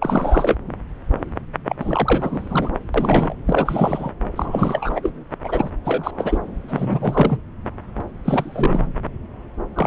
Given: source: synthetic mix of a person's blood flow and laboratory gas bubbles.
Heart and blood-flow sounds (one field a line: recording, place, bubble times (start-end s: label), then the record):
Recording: Doppler ultrasound of blood flow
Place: subclavian vein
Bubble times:
0.01-0.56 s: bubbles
1.69-1.75 s: bubbles
1.79-2.70 s: bubbles
2.94-3.35 s: bubbles
3.46-4.12 s: bubbles
4.32-5.10 s: bubbles
5.44-5.70 s: bubbles
5.84-6.11 s: bubbles
6.19-6.38 s: bubbles
6.68-7.41 s: bubbles
8.25-8.87 s: bubbles
9.76-9.87 s: bubbles
From the record:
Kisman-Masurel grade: 332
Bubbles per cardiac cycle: rolling drumbeat, 9 or more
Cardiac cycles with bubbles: 50 to 99%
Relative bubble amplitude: moderate (0.250 to 0.450)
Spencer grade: 3 (all of the cardiac periods contain showers or single bubble signals, but not dominating or overriding the cardiac motion signals)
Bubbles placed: anywhere in the cardiac cycle